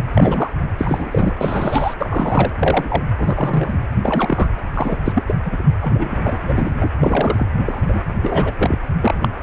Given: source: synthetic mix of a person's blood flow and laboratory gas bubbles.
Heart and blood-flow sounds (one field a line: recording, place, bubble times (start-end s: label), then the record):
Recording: Doppler ultrasound of blood flow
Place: precordium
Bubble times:
0.14-0.51 s: bubbles
0.78-1.33 s: bubbles
1.40-1.94 s: bubbles
1.99-2.52 s: bubbles
2.59-3.03 s: bubbles
3.17-3.74 s: bubbles
4.03-4.48 s: bubbles
4.74-4.98 s: bubbles
5.04-5.24 s: bubbles
5.26-5.35 s: bubbles
5.45-5.58 s: bubbles
5.82-6.37 s: bubbles
6.46-6.73 s: bubbles
6.80-6.90 s: bubbles
7.00-7.46 s: bubbles
7.65-7.83 s: bubbles
7.88-8.00 s: bubbles
8.22-8.51 s: bubbles
8.58-8.78 s: bubbles
9.00-9.14 s: bubbles
9.21-9.29 s: bubbles
From the record:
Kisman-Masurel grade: 243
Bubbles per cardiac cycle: several, 3 to 8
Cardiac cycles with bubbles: 100%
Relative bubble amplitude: loud (0.450 to 0.775)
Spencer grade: 3 (all of the cardiac periods contain showers or single bubble signals, but not dominating or overriding the cardiac motion signals)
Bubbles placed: anywhere in the cardiac cycle